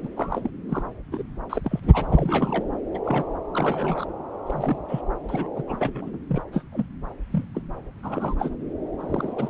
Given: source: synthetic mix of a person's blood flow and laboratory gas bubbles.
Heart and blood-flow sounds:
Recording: Doppler ultrasound of blood flow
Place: subclavian vein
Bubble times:
0.03-0.09 s: bubbles
0.17-0.50 s: bubbles
0.69-0.83 s: bubbles
1.11-1.22 s: bubbles
1.49-1.80 s: bubbles
1.82-2.06 s: bubbles
2.08-2.65 s: bubbles
2.94-2.98 s: bubbles
3.05-3.30 s: bubbles
3.53-4.05 s: bubbles
4.46-4.79 s: bubbles
4.88-5.01 s: bubbles
5.28-5.50 s: bubbles
5.56-5.64 s: bubbles
5.67-6.11 s: bubbles
6.13-6.18 s: bubbles
6.29-6.42 s: bubbles
6.52-6.62 s: bubbles
6.72-6.87 s: bubbles
7.32-7.45 s: bubbles
7.54-7.62 s: bubbles
8.03-8.34 s: bubbles
8.39-8.50 s: bubbles
9.00-9.32 s: bubbles
9.35-9.49 s: bubbles
From the record:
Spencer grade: 3 (all of the cardiac periods contain showers or single bubble signals, but not dominating or overriding the cardiac motion signals)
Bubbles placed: anywhere in the cardiac cycle

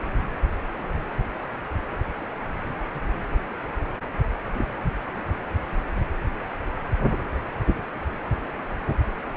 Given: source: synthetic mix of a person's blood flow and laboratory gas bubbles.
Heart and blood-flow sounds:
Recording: Doppler ultrasound of blood flow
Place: precordium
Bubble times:
4.54-4.65 s: bubbles
From the record:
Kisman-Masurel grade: 111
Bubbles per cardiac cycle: 1 to 2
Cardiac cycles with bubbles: 1 to 10%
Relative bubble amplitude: barely perceptible (0.100 to 0.250)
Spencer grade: 1 (occasional bubble signal discernible with the cardiac motion signal, with majority of cardiac periods free of bubbles)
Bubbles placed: anywhere in the cardiac cycle

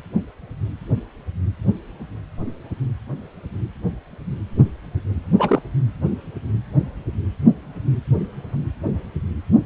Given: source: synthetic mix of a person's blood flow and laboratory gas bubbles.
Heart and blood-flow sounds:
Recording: Doppler ultrasound of blood flow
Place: precordium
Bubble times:
5.38-5.62 s: bubbles
From the record:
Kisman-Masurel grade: 112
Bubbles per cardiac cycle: 1 to 2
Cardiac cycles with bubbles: 1 to 10%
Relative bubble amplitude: moderate (0.250 to 0.450)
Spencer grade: 1 (occasional bubble signal discernible with the cardiac motion signal, with majority of cardiac periods free of bubbles)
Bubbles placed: anywhere in the cardiac cycle

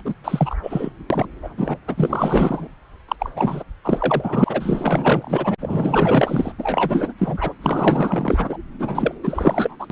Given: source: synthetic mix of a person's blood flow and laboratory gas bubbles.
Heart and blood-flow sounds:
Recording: Doppler ultrasound of blood flow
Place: subclavian vein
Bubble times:
0.04-0.14 s: bubbles
0.24-0.55 s: bubbles
0.63-0.90 s: bubbles
1.10-1.26 s: bubbles
1.43-1.49 s: bubbles
1.57-1.78 s: bubbles
1.87-2.68 s: bubbles
3.08-3.16 s: bubbles
3.19-3.30 s: bubbles
3.35-3.65 s: bubbles
3.84-5.55 s: bubbles
5.61-6.52 s: bubbles
6.58-7.13 s: bubbles
7.18-7.53 s: bubbles
7.61-8.58 s: bubbles
8.79-9.14 s: bubbles
9.23-9.76 s: bubbles
9.79-9.87 s: bubbles
9.90-9.92 s: bubbles
From the record:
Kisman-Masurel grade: 444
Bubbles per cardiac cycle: continuous sound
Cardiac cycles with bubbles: 100%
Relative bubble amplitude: maximal (0.775 to 0.999)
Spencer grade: 4 (maximum detectable bubble signal sounding continuously throughout systole and diastole of every cardiac period, and overriding the amplitude of the normal cardiac signals)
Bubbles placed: anywhere in the cardiac cycle

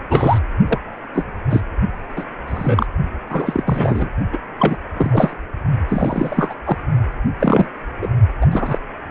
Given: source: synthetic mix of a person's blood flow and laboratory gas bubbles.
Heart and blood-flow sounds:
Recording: Doppler ultrasound of blood flow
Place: precordium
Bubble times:
0.10-0.38 s: bubbles
0.68-0.79 s: bubbles
1.14-1.25 s: bubbles
1.50-1.63 s: bubbles
2.16-2.24 s: bubbles
2.46-2.87 s: bubbles
3.29-4.09 s: bubbles
4.32-4.38 s: bubbles
4.58-4.76 s: bubbles
4.97-5.36 s: bubbles
5.88-6.54 s: bubbles
6.66-6.77 s: bubbles
7.39-7.66 s: bubbles
8.02-8.10 s: bubbles
8.41-8.46 s: bubbles
8.52-8.79 s: bubbles
From the record:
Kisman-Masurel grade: 243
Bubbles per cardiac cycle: several, 3 to 8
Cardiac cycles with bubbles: 100%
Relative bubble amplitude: loud (0.450 to 0.775)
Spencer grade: 3 (all of the cardiac periods contain showers or single bubble signals, but not dominating or overriding the cardiac motion signals)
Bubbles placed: only in the low amplitude regions of the cardiac cycle

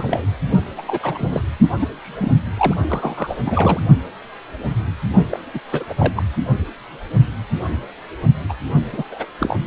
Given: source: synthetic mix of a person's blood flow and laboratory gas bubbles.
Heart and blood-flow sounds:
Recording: Doppler ultrasound of blood flow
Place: precordium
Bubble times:
0.00-0.26 s: bubbles
0.78-0.81 s: bubbles
0.86-1.42 s: bubbles
1.81-1.88 s: bubbles
2.02-2.31 s: bubbles
2.58-2.75 s: bubbles
2.88-3.38 s: bubbles
3.44-3.80 s: bubbles
5.29-5.40 s: bubbles
5.54-5.60 s: bubbles
5.71-5.85 s: bubbles
5.89-5.94 s: bubbles
5.98-6.12 s: bubbles
6.16-6.23 s: bubbles
8.48-8.53 s: bubbles
8.92-9.03 s: bubbles
9.11-9.25 s: bubbles
9.39-9.56 s: bubbles
From the record:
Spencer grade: 3 (all of the cardiac periods contain showers or single bubble signals, but not dominating or overriding the cardiac motion signals)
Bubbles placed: only in the low amplitude regions of the cardiac cycle

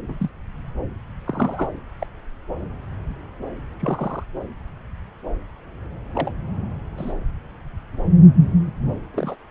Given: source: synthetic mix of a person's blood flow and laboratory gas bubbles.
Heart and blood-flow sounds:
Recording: Doppler ultrasound of blood flow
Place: subclavian vein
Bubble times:
0.08-0.15 s: bubbles
0.20-0.29 s: bubbles
1.27-1.69 s: bubbles
1.99-2.06 s: bubbles
3.79-4.24 s: bubbles
6.13-6.32 s: bubbles
6.97-7.13 s: bubbles
9.13-9.36 s: bubbles
From the record:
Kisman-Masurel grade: 121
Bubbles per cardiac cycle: 1 to 2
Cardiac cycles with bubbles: 10 to 50%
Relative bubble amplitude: barely perceptible (0.100 to 0.250)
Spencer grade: 2 (many but less than half of the cardiac periods contain bubble signals, singularly or in groups)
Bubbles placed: anywhere in the cardiac cycle

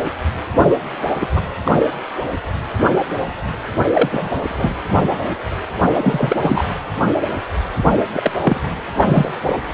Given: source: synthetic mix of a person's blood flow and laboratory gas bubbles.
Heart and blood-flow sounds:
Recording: Doppler ultrasound of blood flow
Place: precordium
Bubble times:
1.14-1.28 s: bubbles
1.35-1.43 s: bubbles
1.64-1.72 s: bubbles
3.93-4.30 s: bubbles
4.49-4.86 s: bubbles
5.94-6.68 s: bubbles
8.13-8.31 s: bubbles
8.41-8.61 s: bubbles
8.96-9.31 s: bubbles
9.46-9.59 s: bubbles
From the record:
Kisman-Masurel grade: 233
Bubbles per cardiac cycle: several, 3 to 8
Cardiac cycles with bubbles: 50 to 99%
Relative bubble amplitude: loud (0.450 to 0.775)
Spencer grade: 3 (all of the cardiac periods contain showers or single bubble signals, but not dominating or overriding the cardiac motion signals)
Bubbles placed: anywhere in the cardiac cycle

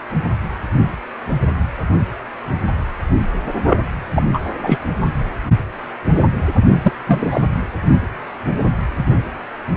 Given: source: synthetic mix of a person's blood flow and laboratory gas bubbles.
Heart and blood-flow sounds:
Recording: Doppler ultrasound of blood flow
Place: precordium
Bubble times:
3.67-3.78 s: bubbles
4.13-4.39 s: bubbles
4.62-4.79 s: bubbles
6.83-6.92 s: bubbles
7.06-7.41 s: bubbles
From the record:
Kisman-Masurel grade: 223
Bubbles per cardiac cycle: several, 3 to 8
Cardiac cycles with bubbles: 10 to 50%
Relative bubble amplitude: loud (0.450 to 0.775)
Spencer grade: 2 (many but less than half of the cardiac periods contain bubble signals, singularly or in groups)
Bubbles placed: anywhere in the cardiac cycle

